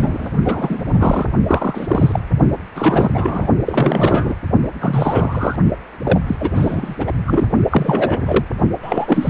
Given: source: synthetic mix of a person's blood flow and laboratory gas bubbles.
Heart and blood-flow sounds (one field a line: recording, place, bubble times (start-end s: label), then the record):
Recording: Doppler ultrasound of blood flow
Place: precordium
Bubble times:
0.00-0.30 s: bubbles
0.44-1.31 s: bubbles
1.46-2.19 s: bubbles
2.75-3.48 s: bubbles
3.66-4.35 s: bubbles
4.80-5.56 s: bubbles
6.04-6.19 s: bubbles
6.26-6.95 s: bubbles
6.99-7.12 s: bubbles
7.27-7.46 s: bubbles
7.71-8.45 s: bubbles
8.82-9.30 s: bubbles
From the record:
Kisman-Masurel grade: 343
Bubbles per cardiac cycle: rolling drumbeat, 9 or more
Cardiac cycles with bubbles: 100%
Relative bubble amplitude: loud (0.450 to 0.775)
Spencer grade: 3 (all of the cardiac periods contain showers or single bubble signals, but not dominating or overriding the cardiac motion signals)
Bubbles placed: only in the low amplitude regions of the cardiac cycle